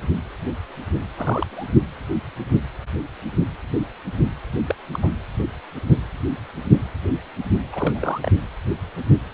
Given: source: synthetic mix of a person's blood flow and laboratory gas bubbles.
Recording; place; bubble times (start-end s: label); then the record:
Doppler ultrasound of blood flow; precordium
1.17-1.68 s: bubbles
4.66-4.75 s: bubbles
4.93-4.99 s: bubbles
5.02-5.13 s: bubbles
7.72-8.20 s: bubbles
8.22-8.32 s: bubbles
From the record:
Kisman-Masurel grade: 221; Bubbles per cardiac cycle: several, 3 to 8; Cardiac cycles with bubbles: 10 to 50%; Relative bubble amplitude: barely perceptible (0.100 to 0.250); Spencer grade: 2 (many but less than half of the cardiac periods contain bubble signals, singularly or in groups); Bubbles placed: anywhere in the cardiac cycle